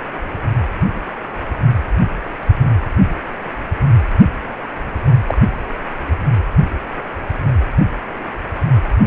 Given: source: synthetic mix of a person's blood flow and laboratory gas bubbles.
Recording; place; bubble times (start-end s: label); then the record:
Doppler ultrasound of blood flow; precordium
5.27-5.38 s: bubbles
From the record:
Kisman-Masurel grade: 112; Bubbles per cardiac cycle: 1 to 2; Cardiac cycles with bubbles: 1 to 10%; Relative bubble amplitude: moderate (0.250 to 0.450); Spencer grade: 1 (occasional bubble signal discernible with the cardiac motion signal, with majority of cardiac periods free of bubbles); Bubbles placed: anywhere in the cardiac cycle